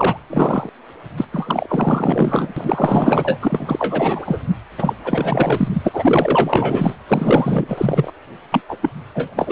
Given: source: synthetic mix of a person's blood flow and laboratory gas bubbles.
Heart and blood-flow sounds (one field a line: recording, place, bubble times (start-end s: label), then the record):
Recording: Doppler ultrasound of blood flow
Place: precordium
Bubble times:
0.00-0.22 s: bubbles
0.29-0.70 s: bubbles
1.17-1.25 s: bubbles
1.32-2.53 s: bubbles
2.56-4.38 s: bubbles
4.77-4.93 s: bubbles
5.04-5.68 s: bubbles
5.73-5.89 s: bubbles
5.93-6.96 s: bubbles
7.08-8.12 s: bubbles
8.51-8.61 s: bubbles
8.69-8.77 s: bubbles
8.82-8.90 s: bubbles
9.14-9.34 s: bubbles
9.37-9.52 s: bubbles
From the record:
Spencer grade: 4 (maximum detectable bubble signal sounding continuously throughout systole and diastole of every cardiac period, and overriding the amplitude of the normal cardiac signals)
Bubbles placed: anywhere in the cardiac cycle